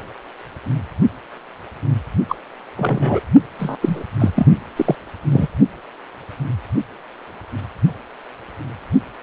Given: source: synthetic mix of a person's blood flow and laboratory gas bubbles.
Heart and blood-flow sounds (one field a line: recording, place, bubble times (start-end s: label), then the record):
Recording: Doppler ultrasound of blood flow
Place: precordium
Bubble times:
2.29-2.35 s: bubbles
2.76-3.20 s: bubbles
3.59-3.77 s: bubbles
3.81-4.04 s: bubbles
4.19-4.30 s: bubbles
4.35-4.46 s: bubbles
4.76-4.95 s: bubbles
5.30-5.47 s: bubbles
From the record:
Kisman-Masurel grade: 223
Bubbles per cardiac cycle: several, 3 to 8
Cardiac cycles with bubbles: 10 to 50%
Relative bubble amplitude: loud (0.450 to 0.775)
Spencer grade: 2 (many but less than half of the cardiac periods contain bubble signals, singularly or in groups)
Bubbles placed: only in the low amplitude regions of the cardiac cycle